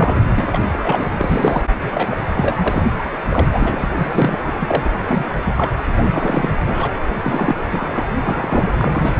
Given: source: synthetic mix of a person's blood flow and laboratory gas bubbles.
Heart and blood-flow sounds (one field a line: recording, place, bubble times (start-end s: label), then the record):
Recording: Doppler ultrasound of blood flow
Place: precordium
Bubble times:
0.00-0.16 s: bubbles
0.35-0.59 s: bubbles
0.72-1.10 s: bubbles
1.19-1.63 s: bubbles
1.92-2.20 s: bubbles
2.36-2.83 s: bubbles
2.98-3.04 s: bubbles
3.12-3.17 s: bubbles
3.29-3.47 s: bubbles
3.52-3.90 s: bubbles
3.98-4.40 s: bubbles
4.46-4.90 s: bubbles
5.07-5.26 s: bubbles
5.44-5.53 s: bubbles
5.56-5.72 s: bubbles
6.04-6.50 s: bubbles
6.66-6.96 s: bubbles
7.21-7.65 s: bubbles
7.71-8.07 s: bubbles
8.24-8.70 s: bubbles
8.77-9.13 s: bubbles
From the record:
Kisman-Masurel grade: 242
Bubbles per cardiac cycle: several, 3 to 8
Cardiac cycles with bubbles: 100%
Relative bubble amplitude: moderate (0.250 to 0.450)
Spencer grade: 3 (all of the cardiac periods contain showers or single bubble signals, but not dominating or overriding the cardiac motion signals)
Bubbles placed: anywhere in the cardiac cycle